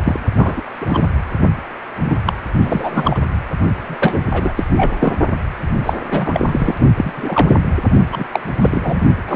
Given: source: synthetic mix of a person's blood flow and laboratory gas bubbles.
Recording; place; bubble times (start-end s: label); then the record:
Doppler ultrasound of blood flow; precordium
0.04-0.20 s: bubbles
0.37-0.61 s: bubbles
0.80-1.08 s: bubbles
2.00-2.16 s: bubbles
2.26-2.33 s: bubbles
2.62-3.19 s: bubbles
3.80-4.21 s: bubbles
4.31-4.67 s: bubbles
4.77-4.97 s: bubbles
5.00-5.13 s: bubbles
5.84-5.93 s: bubbles
6.10-6.75 s: bubbles
6.96-7.56 s: bubbles
8.12-8.27 s: bubbles
8.32-8.40 s: bubbles
8.57-9.00 s: bubbles
9.28-9.36 s: bubbles
From the record:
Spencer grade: 3 (all of the cardiac periods contain showers or single bubble signals, but not dominating or overriding the cardiac motion signals); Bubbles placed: only in the low amplitude regions of the cardiac cycle